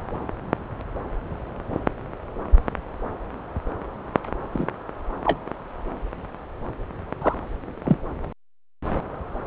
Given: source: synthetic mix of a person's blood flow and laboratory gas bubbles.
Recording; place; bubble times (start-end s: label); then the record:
Doppler ultrasound of blood flow; subclavian vein
4.53-4.66 s: bubbles
5.25-5.38 s: bubbles
7.21-7.34 s: bubbles
7.84-7.97 s: bubbles
From the record:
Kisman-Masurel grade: 123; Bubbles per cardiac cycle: 1 to 2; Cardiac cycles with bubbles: 10 to 50%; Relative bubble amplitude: loud (0.450 to 0.775); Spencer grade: 2 (many but less than half of the cardiac periods contain bubble signals, singularly or in groups); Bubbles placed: anywhere in the cardiac cycle